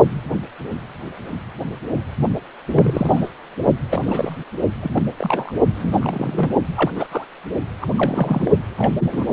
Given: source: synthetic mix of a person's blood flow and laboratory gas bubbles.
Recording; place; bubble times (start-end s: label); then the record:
Doppler ultrasound of blood flow; precordium
2.73-3.29 s: bubbles
3.90-4.36 s: bubbles
4.81-5.02 s: bubbles
5.17-5.53 s: bubbles
5.76-6.52 s: bubbles
6.75-6.91 s: bubbles
6.95-7.06 s: bubbles
7.11-7.24 s: bubbles
7.81-7.87 s: bubbles
7.96-8.51 s: bubbles
8.78-8.95 s: bubbles
8.99-9.33 s: bubbles
From the record:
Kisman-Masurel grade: 232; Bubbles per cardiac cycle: several, 3 to 8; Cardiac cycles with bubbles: 50 to 99%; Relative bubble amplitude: moderate (0.250 to 0.450); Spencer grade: 3 (all of the cardiac periods contain showers or single bubble signals, but not dominating or overriding the cardiac motion signals); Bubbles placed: only in the low amplitude regions of the cardiac cycle